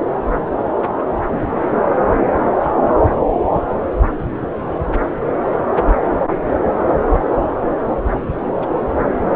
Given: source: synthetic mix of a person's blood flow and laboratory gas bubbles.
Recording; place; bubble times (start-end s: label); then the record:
Doppler ultrasound of blood flow; subclavian vein
4.97-5.05 s: bubbles
5.15-5.22 s: bubbles
6.46-6.75 s: bubbles
6.80-6.95 s: bubbles
8.59-8.67 s: bubbles
From the record:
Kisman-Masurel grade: 121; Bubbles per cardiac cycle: 1 to 2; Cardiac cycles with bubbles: 10 to 50%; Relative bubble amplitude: barely perceptible (0.100 to 0.250); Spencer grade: 2 (many but less than half of the cardiac periods contain bubble signals, singularly or in groups); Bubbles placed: anywhere in the cardiac cycle